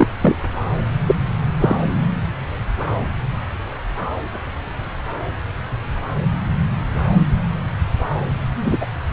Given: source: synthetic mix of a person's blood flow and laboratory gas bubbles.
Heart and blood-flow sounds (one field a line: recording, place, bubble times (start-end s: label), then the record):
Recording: Doppler ultrasound of blood flow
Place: subclavian vein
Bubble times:
0.00-0.08 s: bubbles
0.21-0.35 s: bubbles
1.06-1.15 s: bubbles
1.61-1.75 s: bubbles
8.64-8.77 s: bubbles
8.80-8.86 s: bubbles
From the record:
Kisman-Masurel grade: 123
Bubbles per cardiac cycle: 1 to 2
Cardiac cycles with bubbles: 10 to 50%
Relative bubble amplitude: loud (0.450 to 0.775)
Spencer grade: 2 (many but less than half of the cardiac periods contain bubble signals, singularly or in groups)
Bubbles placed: anywhere in the cardiac cycle